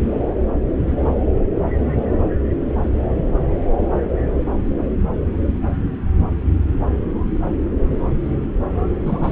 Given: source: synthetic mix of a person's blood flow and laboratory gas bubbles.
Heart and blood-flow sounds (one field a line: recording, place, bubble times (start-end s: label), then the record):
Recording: Doppler ultrasound of blood flow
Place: subclavian vein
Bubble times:
9.05-9.32 s: bubbles
From the record:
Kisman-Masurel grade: 223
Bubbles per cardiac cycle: several, 3 to 8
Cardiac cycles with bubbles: 10 to 50%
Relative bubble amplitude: loud (0.450 to 0.775)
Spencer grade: 2 (many but less than half of the cardiac periods contain bubble signals, singularly or in groups)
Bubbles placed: anywhere in the cardiac cycle